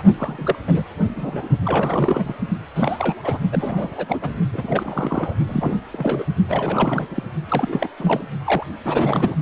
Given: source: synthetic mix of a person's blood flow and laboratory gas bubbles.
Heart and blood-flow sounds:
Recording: Doppler ultrasound of blood flow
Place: precordium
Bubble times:
0.00-0.02 s: bubbles
0.17-0.56 s: bubbles
0.67-0.84 s: bubbles
1.17-1.48 s: bubbles
1.65-2.34 s: bubbles
2.75-3.15 s: bubbles
3.23-3.38 s: bubbles
3.51-4.29 s: bubbles
4.52-5.35 s: bubbles
5.46-5.76 s: bubbles
5.92-6.25 s: bubbles
6.48-7.23 s: bubbles
7.48-7.87 s: bubbles
8.00-8.23 s: bubbles
8.45-8.64 s: bubbles
8.85-9.35 s: bubbles
From the record:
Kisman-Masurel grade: 342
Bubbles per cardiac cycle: rolling drumbeat, 9 or more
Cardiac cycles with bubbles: 100%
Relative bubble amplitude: moderate (0.250 to 0.450)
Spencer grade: 3 (all of the cardiac periods contain showers or single bubble signals, but not dominating or overriding the cardiac motion signals)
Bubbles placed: only in the low amplitude regions of the cardiac cycle

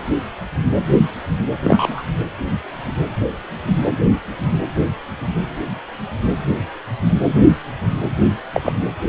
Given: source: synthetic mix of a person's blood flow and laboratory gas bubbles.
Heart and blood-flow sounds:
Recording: Doppler ultrasound of blood flow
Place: precordium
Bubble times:
1.62-2.04 s: bubbles
8.53-8.72 s: bubbles
From the record:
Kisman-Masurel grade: 123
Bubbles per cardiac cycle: 1 to 2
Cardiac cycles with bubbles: 10 to 50%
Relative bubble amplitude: loud (0.450 to 0.775)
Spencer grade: 2 (many but less than half of the cardiac periods contain bubble signals, singularly or in groups)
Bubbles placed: anywhere in the cardiac cycle

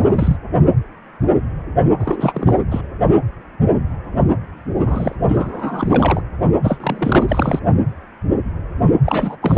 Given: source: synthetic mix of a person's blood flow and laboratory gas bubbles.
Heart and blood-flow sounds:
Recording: Doppler ultrasound of blood flow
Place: precordium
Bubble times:
0.00-0.36 s: bubbles
2.00-2.58 s: bubbles
2.71-2.81 s: bubbles
4.76-5.15 s: bubbles
5.28-6.21 s: bubbles
6.63-6.77 s: bubbles
6.80-7.59 s: bubbles
9.04-9.37 s: bubbles
9.42-9.58 s: bubbles
From the record:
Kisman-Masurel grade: 332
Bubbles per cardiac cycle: rolling drumbeat, 9 or more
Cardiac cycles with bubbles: 50 to 99%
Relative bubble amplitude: moderate (0.250 to 0.450)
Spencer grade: 3 (all of the cardiac periods contain showers or single bubble signals, but not dominating or overriding the cardiac motion signals)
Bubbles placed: only in the low amplitude regions of the cardiac cycle

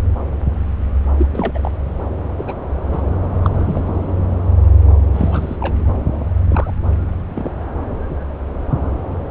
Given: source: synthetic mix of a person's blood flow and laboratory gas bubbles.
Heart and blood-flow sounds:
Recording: Doppler ultrasound of blood flow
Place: subclavian vein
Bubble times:
1.18-1.28 s: bubbles
1.32-1.71 s: bubbles
2.38-2.58 s: bubbles
2.92-3.01 s: bubbles
3.44-3.50 s: bubbles
3.53-4.11 s: bubbles
5.13-5.56 s: bubbles
5.60-5.75 s: bubbles
6.50-6.72 s: bubbles
7.35-7.51 s: bubbles
8.09-8.16 s: bubbles
From the record:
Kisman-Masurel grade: 232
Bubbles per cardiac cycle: several, 3 to 8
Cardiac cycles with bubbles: 50 to 99%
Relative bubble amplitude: moderate (0.250 to 0.450)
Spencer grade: 3 (all of the cardiac periods contain showers or single bubble signals, but not dominating or overriding the cardiac motion signals)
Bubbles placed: anywhere in the cardiac cycle

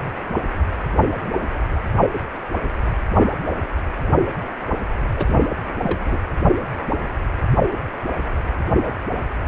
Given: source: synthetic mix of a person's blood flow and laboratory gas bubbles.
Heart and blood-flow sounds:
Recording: Doppler ultrasound of blood flow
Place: precordium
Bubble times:
5.17-5.47 s: bubbles
5.83-6.19 s: bubbles
From the record:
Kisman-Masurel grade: 211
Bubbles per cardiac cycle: several, 3 to 8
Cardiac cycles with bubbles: 1 to 10%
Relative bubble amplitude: barely perceptible (0.100 to 0.250)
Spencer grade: 1 (occasional bubble signal discernible with the cardiac motion signal, with majority of cardiac periods free of bubbles)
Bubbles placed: anywhere in the cardiac cycle

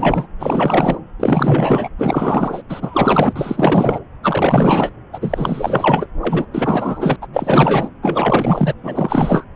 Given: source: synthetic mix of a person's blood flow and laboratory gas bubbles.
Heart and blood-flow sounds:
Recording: Doppler ultrasound of blood flow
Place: subclavian vein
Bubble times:
0.00-0.27 s: bubbles
0.39-0.98 s: bubbles
1.20-1.88 s: bubbles
1.98-2.62 s: bubbles
2.69-3.33 s: bubbles
3.35-3.99 s: bubbles
4.23-4.92 s: bubbles
5.12-6.06 s: bubbles
6.21-6.46 s: bubbles
6.51-7.16 s: bubbles
7.21-7.27 s: bubbles
7.33-7.89 s: bubbles
8.02-8.73 s: bubbles
8.84-9.44 s: bubbles
From the record:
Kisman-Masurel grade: 444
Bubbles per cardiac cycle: continuous sound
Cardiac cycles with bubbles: 100%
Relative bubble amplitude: maximal (0.775 to 0.999)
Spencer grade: 4 (maximum detectable bubble signal sounding continuously throughout systole and diastole of every cardiac period, and overriding the amplitude of the normal cardiac signals)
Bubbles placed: anywhere in the cardiac cycle

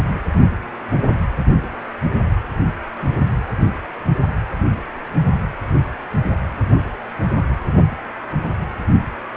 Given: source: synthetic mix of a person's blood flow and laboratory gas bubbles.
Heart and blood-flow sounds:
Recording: Doppler ultrasound of blood flow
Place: precordium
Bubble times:
0.00-0.03 s: bubbles
From the record:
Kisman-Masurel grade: 113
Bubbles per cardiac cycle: 1 to 2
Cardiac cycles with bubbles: 1 to 10%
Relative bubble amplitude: loud (0.450 to 0.775)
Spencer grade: 1 (occasional bubble signal discernible with the cardiac motion signal, with majority of cardiac periods free of bubbles)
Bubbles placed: only in the low amplitude regions of the cardiac cycle

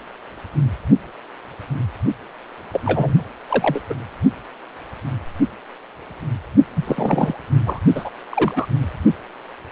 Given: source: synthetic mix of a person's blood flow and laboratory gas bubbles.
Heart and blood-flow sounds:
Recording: Doppler ultrasound of blood flow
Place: precordium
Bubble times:
2.73-2.81 s: bubbles
2.85-3.14 s: bubbles
3.49-3.80 s: bubbles
3.89-3.95 s: bubbles
6.76-6.83 s: bubbles
6.86-7.33 s: bubbles
7.66-7.80 s: bubbles
7.95-8.11 s: bubbles
8.30-8.66 s: bubbles
From the record:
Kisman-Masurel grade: 232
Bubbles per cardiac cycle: several, 3 to 8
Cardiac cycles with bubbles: 50 to 99%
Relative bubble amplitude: moderate (0.250 to 0.450)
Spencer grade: 3 (all of the cardiac periods contain showers or single bubble signals, but not dominating or overriding the cardiac motion signals)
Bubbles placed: only in the low amplitude regions of the cardiac cycle

